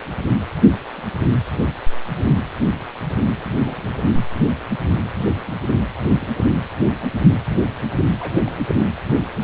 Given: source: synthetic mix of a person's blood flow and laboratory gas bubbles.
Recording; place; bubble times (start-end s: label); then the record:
Doppler ultrasound of blood flow; precordium
0.96-1.26 s: bubbles
3.41-3.90 s: bubbles
5.45-5.54 s: bubbles
6.21-6.29 s: bubbles
8.20-8.51 s: bubbles
From the record:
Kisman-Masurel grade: 121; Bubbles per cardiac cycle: 1 to 2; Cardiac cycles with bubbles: 10 to 50%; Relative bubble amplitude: barely perceptible (0.100 to 0.250); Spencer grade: 2 (many but less than half of the cardiac periods contain bubble signals, singularly or in groups); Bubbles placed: anywhere in the cardiac cycle